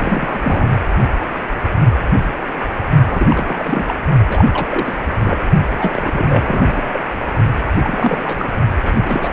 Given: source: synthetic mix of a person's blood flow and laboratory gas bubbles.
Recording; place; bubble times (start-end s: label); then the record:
Doppler ultrasound of blood flow; precordium
0.00-0.40 s: bubbles
0.43-0.68 s: bubbles
3.05-3.27 s: bubbles
3.29-3.95 s: bubbles
4.29-4.46 s: bubbles
4.51-5.01 s: bubbles
5.17-5.45 s: bubbles
5.66-7.00 s: bubbles
7.75-8.49 s: bubbles
8.84-9.02 s: bubbles
9.04-9.33 s: bubbles
From the record:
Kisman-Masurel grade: 332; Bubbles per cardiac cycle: rolling drumbeat, 9 or more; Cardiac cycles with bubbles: 50 to 99%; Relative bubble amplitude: moderate (0.250 to 0.450); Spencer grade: 3 (all of the cardiac periods contain showers or single bubble signals, but not dominating or overriding the cardiac motion signals); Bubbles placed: only in the low amplitude regions of the cardiac cycle